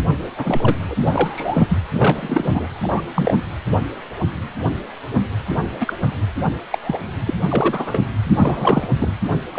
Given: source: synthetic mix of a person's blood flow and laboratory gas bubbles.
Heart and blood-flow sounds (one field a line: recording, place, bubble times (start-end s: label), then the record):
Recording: Doppler ultrasound of blood flow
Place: precordium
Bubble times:
0.37-0.76 s: bubbles
0.88-0.95 s: bubbles
1.07-1.78 s: bubbles
1.93-2.68 s: bubbles
2.82-3.01 s: bubbles
3.15-3.34 s: bubbles
5.48-5.63 s: bubbles
5.80-5.93 s: bubbles
6.71-6.78 s: bubbles
6.83-6.99 s: bubbles
7.26-7.33 s: bubbles
7.48-8.02 s: bubbles
8.23-8.87 s: bubbles
8.99-9.13 s: bubbles
9.53-9.59 s: bubbles
From the record:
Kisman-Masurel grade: 232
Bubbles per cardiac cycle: several, 3 to 8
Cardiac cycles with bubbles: 50 to 99%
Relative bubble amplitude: moderate (0.250 to 0.450)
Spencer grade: 3 (all of the cardiac periods contain showers or single bubble signals, but not dominating or overriding the cardiac motion signals)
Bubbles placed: anywhere in the cardiac cycle